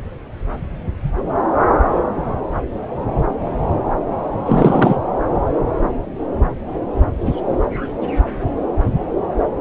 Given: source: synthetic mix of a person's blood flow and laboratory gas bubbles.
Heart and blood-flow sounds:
Doppler ultrasound of blood flow; subclavian vein
4.46-4.98 s: bubbles
From the record:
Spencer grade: 1 (occasional bubble signal discernible with the cardiac motion signal, with majority of cardiac periods free of bubbles); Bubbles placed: anywhere in the cardiac cycle

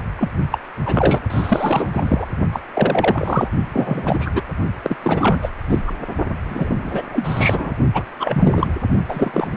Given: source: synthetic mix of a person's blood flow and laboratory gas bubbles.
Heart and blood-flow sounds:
Doppler ultrasound of blood flow; precordium
0.18-0.29 s: bubbles
0.52-0.59 s: bubbles
0.85-1.21 s: bubbles
1.30-1.87 s: bubbles
1.94-2.25 s: bubbles
2.52-2.60 s: bubbles
2.74-3.50 s: bubbles
3.72-4.42 s: bubbles
4.83-4.96 s: bubbles
5.02-5.39 s: bubbles
5.42-5.49 s: bubbles
5.68-5.79 s: bubbles
5.86-5.92 s: bubbles
6.44-7.03 s: bubbles
7.11-7.74 s: bubbles
7.94-8.04 s: bubbles
8.19-8.75 s: bubbles
9.08-9.47 s: bubbles
9.51-9.57 s: bubbles
From the record:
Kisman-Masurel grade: 343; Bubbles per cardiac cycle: rolling drumbeat, 9 or more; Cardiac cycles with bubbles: 100%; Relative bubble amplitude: loud (0.450 to 0.775); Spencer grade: 3 (all of the cardiac periods contain showers or single bubble signals, but not dominating or overriding the cardiac motion signals); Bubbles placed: only in the low amplitude regions of the cardiac cycle

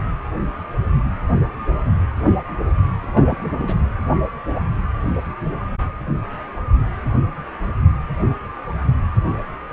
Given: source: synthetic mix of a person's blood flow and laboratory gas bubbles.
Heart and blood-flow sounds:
Doppler ultrasound of blood flow; precordium
3.02-3.75 s: bubbles
From the record:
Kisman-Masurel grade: 211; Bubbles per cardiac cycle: several, 3 to 8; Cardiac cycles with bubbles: 1 to 10%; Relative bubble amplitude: barely perceptible (0.100 to 0.250); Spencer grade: 1 (occasional bubble signal discernible with the cardiac motion signal, with majority of cardiac periods free of bubbles); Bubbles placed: anywhere in the cardiac cycle

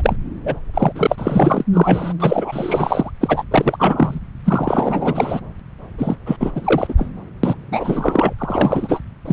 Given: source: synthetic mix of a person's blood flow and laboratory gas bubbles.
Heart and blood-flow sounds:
Doppler ultrasound of blood flow; subclavian vein
0.00-0.16 s: bubbles
0.44-0.59 s: bubbles
0.73-0.93 s: bubbles
0.95-1.64 s: bubbles
1.73-2.13 s: bubbles
2.19-3.10 s: bubbles
3.21-3.44 s: bubbles
3.51-3.77 s: bubbles
3.79-4.20 s: bubbles
4.45-5.40 s: bubbles
5.98-6.16 s: bubbles
6.26-6.37 s: bubbles
6.40-6.51 s: bubbles
6.54-6.95 s: bubbles
6.97-7.10 s: bubbles
7.43-7.57 s: bubbles
7.71-8.33 s: bubbles
8.38-9.00 s: bubbles
9.25-9.33 s: bubbles
From the record:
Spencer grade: 3 (all of the cardiac periods contain showers or single bubble signals, but not dominating or overriding the cardiac motion signals); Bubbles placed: anywhere in the cardiac cycle

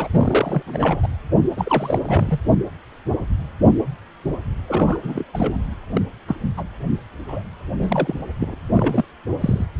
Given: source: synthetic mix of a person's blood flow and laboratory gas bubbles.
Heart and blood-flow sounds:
Doppler ultrasound of blood flow; precordium
0.00-0.08 s: bubbles
0.11-0.62 s: bubbles
0.66-1.08 s: bubbles
1.56-1.99 s: bubbles
2.01-2.40 s: bubbles
4.67-5.00 s: bubbles
5.02-5.25 s: bubbles
5.33-5.58 s: bubbles
5.93-6.01 s: bubbles
6.27-6.35 s: bubbles
6.57-6.64 s: bubbles
7.27-7.42 s: bubbles
7.77-8.20 s: bubbles
8.40-8.56 s: bubbles
8.72-9.04 s: bubbles
9.41-9.66 s: bubbles
From the record:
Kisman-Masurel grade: 232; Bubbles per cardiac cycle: several, 3 to 8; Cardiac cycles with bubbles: 50 to 99%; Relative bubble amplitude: moderate (0.250 to 0.450); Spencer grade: 3 (all of the cardiac periods contain showers or single bubble signals, but not dominating or overriding the cardiac motion signals); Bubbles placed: anywhere in the cardiac cycle

